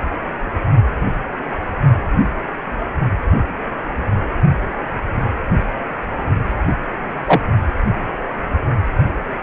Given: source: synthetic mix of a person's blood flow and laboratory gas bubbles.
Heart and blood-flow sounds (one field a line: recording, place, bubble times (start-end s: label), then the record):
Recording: Doppler ultrasound of blood flow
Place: precordium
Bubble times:
7.28-7.42 s: bubbles
From the record:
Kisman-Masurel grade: 113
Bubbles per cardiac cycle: 1 to 2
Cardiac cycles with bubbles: 1 to 10%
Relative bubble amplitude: loud (0.450 to 0.775)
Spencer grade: 1 (occasional bubble signal discernible with the cardiac motion signal, with majority of cardiac periods free of bubbles)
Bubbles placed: only in the low amplitude regions of the cardiac cycle